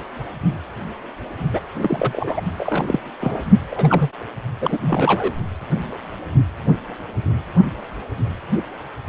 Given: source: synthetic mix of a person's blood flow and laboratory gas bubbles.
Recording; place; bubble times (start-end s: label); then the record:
Doppler ultrasound of blood flow; precordium
1.53-1.61 s: bubbles
1.81-2.41 s: bubbles
2.58-3.00 s: bubbles
3.20-3.36 s: bubbles
3.71-4.09 s: bubbles
4.60-4.78 s: bubbles
4.81-5.33 s: bubbles
From the record:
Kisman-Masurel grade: 222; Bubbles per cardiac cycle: several, 3 to 8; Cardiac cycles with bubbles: 10 to 50%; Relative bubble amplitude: moderate (0.250 to 0.450); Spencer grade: 2 (many but less than half of the cardiac periods contain bubble signals, singularly or in groups); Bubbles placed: only in the low amplitude regions of the cardiac cycle